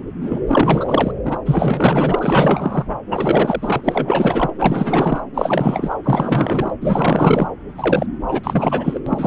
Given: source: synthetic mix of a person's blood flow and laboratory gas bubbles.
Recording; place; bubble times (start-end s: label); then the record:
Doppler ultrasound of blood flow; subclavian vein
0.21-0.42 s: bubbles
0.47-1.12 s: bubbles
1.25-1.39 s: bubbles
1.45-2.85 s: bubbles
3.09-3.81 s: bubbles
3.84-4.50 s: bubbles
4.58-5.22 s: bubbles
5.34-5.95 s: bubbles
6.04-6.74 s: bubbles
6.80-7.47 s: bubbles
7.77-8.06 s: bubbles
8.28-9.01 s: bubbles
9.06-9.27 s: bubbles
From the record:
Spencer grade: 4 (maximum detectable bubble signal sounding continuously throughout systole and diastole of every cardiac period, and overriding the amplitude of the normal cardiac signals); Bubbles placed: anywhere in the cardiac cycle